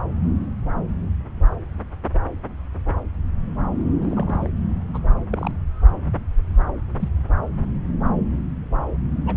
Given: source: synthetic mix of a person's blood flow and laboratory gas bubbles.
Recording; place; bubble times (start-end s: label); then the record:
Doppler ultrasound of blood flow; subclavian vein
3.99-4.49 s: bubbles
4.94-4.99 s: bubbles
5.30-5.51 s: bubbles
7.00-7.08 s: bubbles
9.25-9.36 s: bubbles
From the record:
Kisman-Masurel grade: 121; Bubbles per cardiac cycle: 1 to 2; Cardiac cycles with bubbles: 10 to 50%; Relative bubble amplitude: barely perceptible (0.100 to 0.250); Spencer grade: 2 (many but less than half of the cardiac periods contain bubble signals, singularly or in groups); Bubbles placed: anywhere in the cardiac cycle